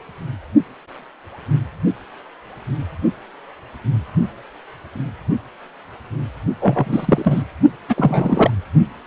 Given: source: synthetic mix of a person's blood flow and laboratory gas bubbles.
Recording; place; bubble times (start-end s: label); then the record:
Doppler ultrasound of blood flow; precordium
6.59-7.42 s: bubbles
7.88-8.51 s: bubbles
From the record:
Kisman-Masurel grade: 223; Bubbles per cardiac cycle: several, 3 to 8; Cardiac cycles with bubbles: 10 to 50%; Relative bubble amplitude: loud (0.450 to 0.775); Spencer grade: 2 (many but less than half of the cardiac periods contain bubble signals, singularly or in groups); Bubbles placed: only in the low amplitude regions of the cardiac cycle